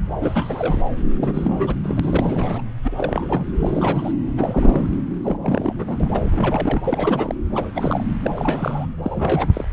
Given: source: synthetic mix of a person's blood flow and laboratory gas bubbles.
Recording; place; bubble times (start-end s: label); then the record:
Doppler ultrasound of blood flow; subclavian vein
0.21-0.89 s: bubbles
1.19-1.74 s: bubbles
1.83-2.64 s: bubbles
2.84-3.46 s: bubbles
3.60-4.12 s: bubbles
4.37-4.86 s: bubbles
5.23-5.37 s: bubbles
5.41-5.73 s: bubbles
5.79-5.96 s: bubbles
6.00-6.81 s: bubbles
6.85-7.35 s: bubbles
7.52-7.71 s: bubbles
7.75-8.04 s: bubbles
8.22-8.31 s: bubbles
8.36-8.86 s: bubbles
9.03-9.49 s: bubbles
9.53-9.64 s: bubbles
From the record:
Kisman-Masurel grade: 342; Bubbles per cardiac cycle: rolling drumbeat, 9 or more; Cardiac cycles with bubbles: 100%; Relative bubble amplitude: moderate (0.250 to 0.450); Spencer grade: 3 (all of the cardiac periods contain showers or single bubble signals, but not dominating or overriding the cardiac motion signals); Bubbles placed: anywhere in the cardiac cycle